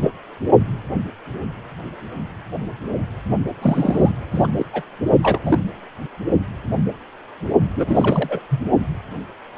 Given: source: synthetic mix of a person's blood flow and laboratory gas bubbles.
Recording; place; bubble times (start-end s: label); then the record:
Doppler ultrasound of blood flow; precordium
0.02-0.11 s: bubbles
3.61-4.11 s: bubbles
4.31-4.48 s: bubbles
4.56-4.65 s: bubbles
4.72-4.82 s: bubbles
5.22-5.39 s: bubbles
5.43-5.58 s: bubbles
7.75-8.42 s: bubbles
8.49-8.66 s: bubbles
From the record:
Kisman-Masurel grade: 232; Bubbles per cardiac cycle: several, 3 to 8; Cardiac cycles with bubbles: 50 to 99%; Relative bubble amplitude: moderate (0.250 to 0.450); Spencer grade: 3 (all of the cardiac periods contain showers or single bubble signals, but not dominating or overriding the cardiac motion signals); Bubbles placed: only in the low amplitude regions of the cardiac cycle